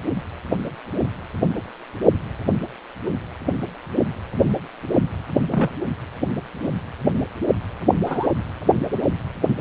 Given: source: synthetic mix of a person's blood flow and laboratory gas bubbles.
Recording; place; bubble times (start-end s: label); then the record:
Doppler ultrasound of blood flow; precordium
5.51-5.69 s: bubbles
8.06-8.29 s: bubbles
From the record:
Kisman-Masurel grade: 122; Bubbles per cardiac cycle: 1 to 2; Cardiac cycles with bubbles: 10 to 50%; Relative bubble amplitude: moderate (0.250 to 0.450); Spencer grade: 2 (many but less than half of the cardiac periods contain bubble signals, singularly or in groups); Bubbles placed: anywhere in the cardiac cycle